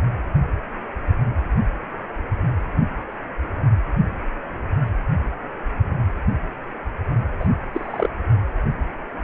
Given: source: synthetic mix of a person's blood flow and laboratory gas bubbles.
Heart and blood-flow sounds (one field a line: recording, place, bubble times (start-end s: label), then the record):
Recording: Doppler ultrasound of blood flow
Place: precordium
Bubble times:
7.39-7.47 s: bubbles
7.74-8.08 s: bubbles
From the record:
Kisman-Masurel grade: 112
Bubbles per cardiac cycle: 1 to 2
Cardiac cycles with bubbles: 1 to 10%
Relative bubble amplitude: moderate (0.250 to 0.450)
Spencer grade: 1 (occasional bubble signal discernible with the cardiac motion signal, with majority of cardiac periods free of bubbles)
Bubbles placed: anywhere in the cardiac cycle